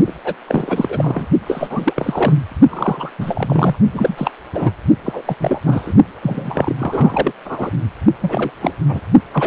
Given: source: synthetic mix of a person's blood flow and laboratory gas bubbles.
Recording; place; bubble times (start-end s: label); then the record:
Doppler ultrasound of blood flow; precordium
0.07-0.13 s: bubbles
0.25-0.36 s: bubbles
0.47-1.27 s: bubbles
1.46-2.33 s: bubbles
2.68-3.11 s: bubbles
3.19-3.75 s: bubbles
3.93-4.30 s: bubbles
4.53-4.71 s: bubbles
5.04-5.22 s: bubbles
5.25-5.35 s: bubbles
5.40-5.93 s: bubbles
6.22-6.75 s: bubbles
6.79-7.33 s: bubbles
7.45-7.71 s: bubbles
8.22-8.51 s: bubbles
8.61-8.75 s: bubbles
8.88-9.00 s: bubbles
9.32-9.47 s: bubbles
From the record:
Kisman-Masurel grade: 343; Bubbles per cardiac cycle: rolling drumbeat, 9 or more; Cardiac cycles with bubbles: 100%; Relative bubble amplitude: loud (0.450 to 0.775); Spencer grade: 3 (all of the cardiac periods contain showers or single bubble signals, but not dominating or overriding the cardiac motion signals); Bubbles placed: only in the low amplitude regions of the cardiac cycle